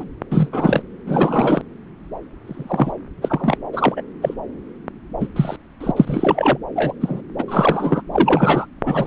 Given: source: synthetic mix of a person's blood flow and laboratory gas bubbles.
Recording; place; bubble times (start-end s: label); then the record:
Doppler ultrasound of blood flow; subclavian vein
0.00-0.05 s: bubbles
0.31-0.49 s: bubbles
0.52-0.82 s: bubbles
1.07-1.62 s: bubbles
2.46-2.92 s: bubbles
3.21-3.57 s: bubbles
3.73-4.02 s: bubbles
4.22-4.34 s: bubbles
5.20-5.28 s: bubbles
5.36-5.56 s: bubbles
5.80-5.91 s: bubbles
5.96-6.58 s: bubbles
6.75-6.93 s: bubbles
7.01-7.21 s: bubbles
7.38-7.44 s: bubbles
7.48-8.01 s: bubbles
8.12-8.66 s: bubbles
8.86-9.07 s: bubbles
From the record:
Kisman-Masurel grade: 233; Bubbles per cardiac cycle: several, 3 to 8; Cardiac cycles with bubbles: 50 to 99%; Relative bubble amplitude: loud (0.450 to 0.775); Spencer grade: 3 (all of the cardiac periods contain showers or single bubble signals, but not dominating or overriding the cardiac motion signals); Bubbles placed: anywhere in the cardiac cycle